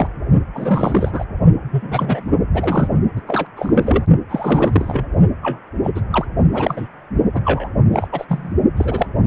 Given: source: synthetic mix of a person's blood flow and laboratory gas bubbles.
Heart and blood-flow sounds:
Doppler ultrasound of blood flow; precordium
0.00-0.07 s: bubbles
0.53-1.25 s: bubbles
1.71-2.35 s: bubbles
2.54-2.88 s: bubbles
3.16-3.21 s: bubbles
3.27-3.47 s: bubbles
3.56-4.04 s: bubbles
4.29-5.04 s: bubbles
5.42-5.59 s: bubbles
5.83-5.91 s: bubbles
5.95-6.00 s: bubbles
6.11-6.25 s: bubbles
6.53-6.88 s: bubbles
7.34-7.42 s: bubbles
7.45-7.69 s: bubbles
7.92-8.07 s: bubbles
8.12-8.24 s: bubbles
8.29-8.54 s: bubbles
8.77-9.06 s: bubbles
9.23-9.27 s: bubbles
From the record:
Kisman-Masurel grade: 332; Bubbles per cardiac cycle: rolling drumbeat, 9 or more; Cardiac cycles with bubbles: 50 to 99%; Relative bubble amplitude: moderate (0.250 to 0.450); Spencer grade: 3 (all of the cardiac periods contain showers or single bubble signals, but not dominating or overriding the cardiac motion signals); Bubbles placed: only in the low amplitude regions of the cardiac cycle

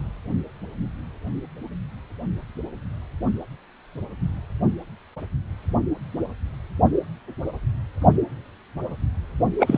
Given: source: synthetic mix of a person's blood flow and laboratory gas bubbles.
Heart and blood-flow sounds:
Doppler ultrasound of blood flow; precordium
9.58-9.77 s: bubbles
From the record:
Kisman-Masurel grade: 212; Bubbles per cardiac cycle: several, 3 to 8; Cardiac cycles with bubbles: 1 to 10%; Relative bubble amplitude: moderate (0.250 to 0.450); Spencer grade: 1 (occasional bubble signal discernible with the cardiac motion signal, with majority of cardiac periods free of bubbles); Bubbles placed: only in the low amplitude regions of the cardiac cycle

